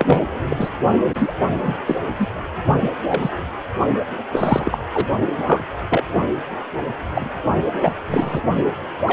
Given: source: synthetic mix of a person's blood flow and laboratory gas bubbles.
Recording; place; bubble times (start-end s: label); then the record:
Doppler ultrasound of blood flow; precordium
0.00-0.21 s: bubbles
0.49-0.70 s: bubbles
1.14-1.33 s: bubbles
1.62-1.74 s: bubbles
1.86-1.97 s: bubbles
2.18-2.27 s: bubbles
2.81-2.90 s: bubbles
3.08-3.29 s: bubbles
4.33-4.79 s: bubbles
4.94-5.07 s: bubbles
5.46-5.63 s: bubbles
5.90-6.04 s: bubbles
6.15-6.20 s: bubbles
7.15-7.29 s: bubbles
7.82-7.93 s: bubbles
8.09-8.41 s: bubbles
9.06-9.13 s: bubbles
From the record:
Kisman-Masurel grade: 243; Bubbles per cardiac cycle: several, 3 to 8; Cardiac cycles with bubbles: 100%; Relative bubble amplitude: loud (0.450 to 0.775); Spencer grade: 3 (all of the cardiac periods contain showers or single bubble signals, but not dominating or overriding the cardiac motion signals); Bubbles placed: only in the low amplitude regions of the cardiac cycle